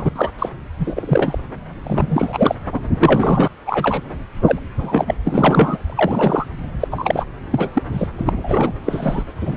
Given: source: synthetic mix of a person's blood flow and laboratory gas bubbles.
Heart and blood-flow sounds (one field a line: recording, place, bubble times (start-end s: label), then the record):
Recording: Doppler ultrasound of blood flow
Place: subclavian vein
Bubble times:
0.00-0.09 s: bubbles
0.15-0.29 s: bubbles
0.39-0.50 s: bubbles
0.79-1.39 s: bubbles
1.83-2.55 s: bubbles
2.72-2.80 s: bubbles
3.00-3.48 s: bubbles
3.66-4.00 s: bubbles
4.45-4.59 s: bubbles
4.78-5.15 s: bubbles
5.24-5.78 s: bubbles
5.83-6.46 s: bubbles
6.80-6.88 s: bubbles
6.92-7.25 s: bubbles
7.50-7.70 s: bubbles
7.74-7.83 s: bubbles
7.92-8.07 s: bubbles
8.18-8.73 s: bubbles
8.83-9.23 s: bubbles
9.40-9.57 s: bubbles
From the record:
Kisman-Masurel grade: 243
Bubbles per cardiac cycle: several, 3 to 8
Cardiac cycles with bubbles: 100%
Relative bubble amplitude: loud (0.450 to 0.775)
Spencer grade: 3 (all of the cardiac periods contain showers or single bubble signals, but not dominating or overriding the cardiac motion signals)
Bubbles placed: anywhere in the cardiac cycle